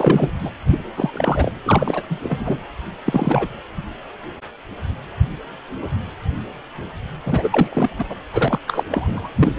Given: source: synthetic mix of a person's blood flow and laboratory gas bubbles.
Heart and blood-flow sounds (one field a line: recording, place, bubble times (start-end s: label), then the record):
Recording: Doppler ultrasound of blood flow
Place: precordium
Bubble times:
0.00-0.30 s: bubbles
0.39-0.51 s: bubbles
0.67-0.81 s: bubbles
0.96-1.53 s: bubbles
1.65-2.02 s: bubbles
2.10-2.20 s: bubbles
2.23-2.58 s: bubbles
3.06-3.48 s: bubbles
7.25-8.04 s: bubbles
8.09-8.15 s: bubbles
8.32-8.59 s: bubbles
8.67-8.84 s: bubbles
8.91-9.30 s: bubbles
9.39-9.53 s: bubbles
9.56-9.59 s: bubbles
From the record:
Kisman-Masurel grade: 333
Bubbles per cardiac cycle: rolling drumbeat, 9 or more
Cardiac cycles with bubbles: 50 to 99%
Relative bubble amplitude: loud (0.450 to 0.775)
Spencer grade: 3 (all of the cardiac periods contain showers or single bubble signals, but not dominating or overriding the cardiac motion signals)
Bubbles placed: anywhere in the cardiac cycle